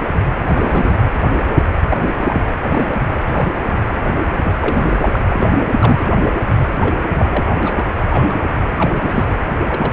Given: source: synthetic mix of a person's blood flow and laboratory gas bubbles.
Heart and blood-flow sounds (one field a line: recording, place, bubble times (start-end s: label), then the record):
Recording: Doppler ultrasound of blood flow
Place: precordium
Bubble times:
0.46-0.97 s: bubbles
1.89-1.97 s: bubbles
2.21-2.49 s: bubbles
2.68-3.06 s: bubbles
3.28-3.70 s: bubbles
4.44-4.52 s: bubbles
4.61-5.24 s: bubbles
5.27-5.67 s: bubbles
5.77-6.07 s: bubbles
6.81-6.96 s: bubbles
7.10-7.52 s: bubbles
7.63-7.87 s: bubbles
8.08-8.38 s: bubbles
8.77-9.37 s: bubbles
9.64-9.93 s: bubbles
From the record:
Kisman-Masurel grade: 232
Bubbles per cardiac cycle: several, 3 to 8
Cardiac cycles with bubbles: 50 to 99%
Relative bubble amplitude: moderate (0.250 to 0.450)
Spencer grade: 3 (all of the cardiac periods contain showers or single bubble signals, but not dominating or overriding the cardiac motion signals)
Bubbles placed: anywhere in the cardiac cycle